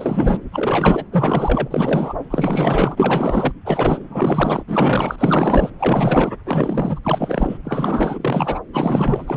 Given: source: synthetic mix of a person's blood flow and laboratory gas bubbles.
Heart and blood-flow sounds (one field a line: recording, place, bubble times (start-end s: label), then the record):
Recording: Doppler ultrasound of blood flow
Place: subclavian vein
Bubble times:
0.00-0.42 s: bubbles
0.52-1.04 s: bubbles
1.11-2.13 s: bubbles
2.30-3.52 s: bubbles
3.65-4.04 s: bubbles
4.11-4.63 s: bubbles
4.67-5.70 s: bubbles
5.79-6.31 s: bubbles
6.45-7.00 s: bubbles
7.03-7.58 s: bubbles
7.65-8.60 s: bubbles
8.72-9.36 s: bubbles
From the record:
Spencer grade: 4 (maximum detectable bubble signal sounding continuously throughout systole and diastole of every cardiac period, and overriding the amplitude of the normal cardiac signals)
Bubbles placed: anywhere in the cardiac cycle